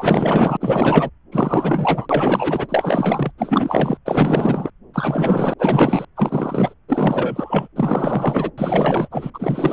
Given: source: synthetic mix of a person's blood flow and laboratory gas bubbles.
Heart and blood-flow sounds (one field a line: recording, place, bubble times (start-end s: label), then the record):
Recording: Doppler ultrasound of blood flow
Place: subclavian vein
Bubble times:
0.00-0.57 s: bubbles
0.60-1.10 s: bubbles
1.31-2.06 s: bubbles
2.09-3.31 s: bubbles
3.38-3.97 s: bubbles
4.05-4.70 s: bubbles
4.94-5.54 s: bubbles
5.59-6.05 s: bubbles
6.16-6.74 s: bubbles
6.89-7.68 s: bubbles
7.76-8.51 s: bubbles
8.58-9.30 s: bubbles
9.34-9.73 s: bubbles
From the record:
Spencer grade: 4 (maximum detectable bubble signal sounding continuously throughout systole and diastole of every cardiac period, and overriding the amplitude of the normal cardiac signals)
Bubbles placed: anywhere in the cardiac cycle